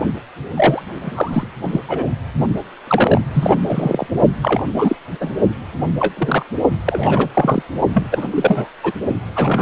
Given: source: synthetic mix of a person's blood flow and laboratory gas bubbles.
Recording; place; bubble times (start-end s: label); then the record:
Doppler ultrasound of blood flow; precordium
0.00-0.02 s: bubbles
0.56-0.82 s: bubbles
1.01-1.48 s: bubbles
1.64-1.79 s: bubbles
1.88-2.09 s: bubbles
2.87-3.21 s: bubbles
3.33-3.58 s: bubbles
3.67-4.07 s: bubbles
4.42-4.65 s: bubbles
4.72-4.95 s: bubbles
5.20-5.37 s: bubbles
5.99-6.14 s: bubbles
6.17-6.45 s: bubbles
6.85-7.28 s: bubbles
7.33-7.62 s: bubbles
7.93-8.04 s: bubbles
8.11-8.66 s: bubbles
8.83-8.92 s: bubbles
9.36-9.62 s: bubbles
From the record:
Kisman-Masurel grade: 233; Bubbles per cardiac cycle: several, 3 to 8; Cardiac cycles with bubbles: 50 to 99%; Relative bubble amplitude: loud (0.450 to 0.775); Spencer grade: 3 (all of the cardiac periods contain showers or single bubble signals, but not dominating or overriding the cardiac motion signals); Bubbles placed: only in the low amplitude regions of the cardiac cycle